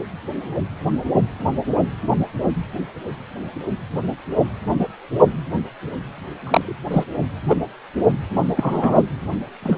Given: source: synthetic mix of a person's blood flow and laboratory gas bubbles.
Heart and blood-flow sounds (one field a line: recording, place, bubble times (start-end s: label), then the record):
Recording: Doppler ultrasound of blood flow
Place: precordium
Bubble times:
6.43-6.76 s: bubbles
6.91-7.04 s: bubbles
7.48-7.56 s: bubbles
8.56-9.02 s: bubbles
9.62-9.78 s: bubbles
From the record:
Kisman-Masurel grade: 123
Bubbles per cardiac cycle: 1 to 2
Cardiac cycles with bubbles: 10 to 50%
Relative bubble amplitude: loud (0.450 to 0.775)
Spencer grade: 2 (many but less than half of the cardiac periods contain bubble signals, singularly or in groups)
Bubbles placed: anywhere in the cardiac cycle